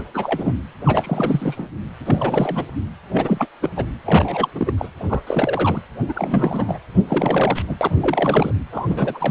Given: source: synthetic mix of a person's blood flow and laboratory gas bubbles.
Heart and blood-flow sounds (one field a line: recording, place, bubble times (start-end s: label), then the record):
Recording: Doppler ultrasound of blood flow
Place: precordium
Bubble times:
0.00-0.02 s: bubbles
0.14-0.53 s: bubbles
0.85-1.68 s: bubbles
2.06-2.66 s: bubbles
3.12-3.47 s: bubbles
3.62-3.69 s: bubbles
3.76-3.85 s: bubbles
4.05-4.49 s: bubbles
4.55-4.73 s: bubbles
4.77-4.88 s: bubbles
4.98-5.22 s: bubbles
5.26-5.82 s: bubbles
6.08-6.13 s: bubbles
6.15-6.78 s: bubbles
7.07-7.62 s: bubbles
7.67-7.75 s: bubbles
7.81-8.52 s: bubbles
8.72-9.31 s: bubbles
From the record:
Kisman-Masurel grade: 342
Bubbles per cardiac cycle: rolling drumbeat, 9 or more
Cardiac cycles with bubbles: 100%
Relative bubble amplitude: moderate (0.250 to 0.450)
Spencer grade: 3 (all of the cardiac periods contain showers or single bubble signals, but not dominating or overriding the cardiac motion signals)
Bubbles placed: anywhere in the cardiac cycle